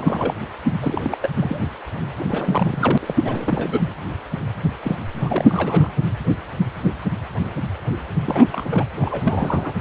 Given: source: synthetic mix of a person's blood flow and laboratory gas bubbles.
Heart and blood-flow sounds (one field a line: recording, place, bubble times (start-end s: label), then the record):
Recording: Doppler ultrasound of blood flow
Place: precordium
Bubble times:
0.00-0.34 s: bubbles
0.82-1.17 s: bubbles
1.22-1.29 s: bubbles
1.37-1.63 s: bubbles
2.19-2.98 s: bubbles
3.02-3.80 s: bubbles
4.83-4.97 s: bubbles
5.20-5.91 s: bubbles
8.25-8.46 s: bubbles
8.52-8.87 s: bubbles
9.01-9.72 s: bubbles
From the record:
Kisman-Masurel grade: 332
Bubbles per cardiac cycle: rolling drumbeat, 9 or more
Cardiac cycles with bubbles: 50 to 99%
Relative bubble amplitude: moderate (0.250 to 0.450)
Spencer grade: 3 (all of the cardiac periods contain showers or single bubble signals, but not dominating or overriding the cardiac motion signals)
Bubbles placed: anywhere in the cardiac cycle